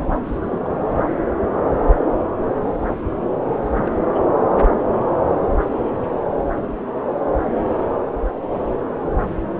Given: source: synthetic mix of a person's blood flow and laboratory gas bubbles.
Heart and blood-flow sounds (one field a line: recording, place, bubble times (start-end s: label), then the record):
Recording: Doppler ultrasound of blood flow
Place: subclavian vein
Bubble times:
0.25-0.73 s: bubbles
3.74-3.91 s: bubbles
4.12-4.23 s: bubbles
From the record:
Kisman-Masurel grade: 221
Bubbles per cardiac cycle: several, 3 to 8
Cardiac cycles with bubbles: 10 to 50%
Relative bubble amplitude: barely perceptible (0.100 to 0.250)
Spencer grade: 2 (many but less than half of the cardiac periods contain bubble signals, singularly or in groups)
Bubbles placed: anywhere in the cardiac cycle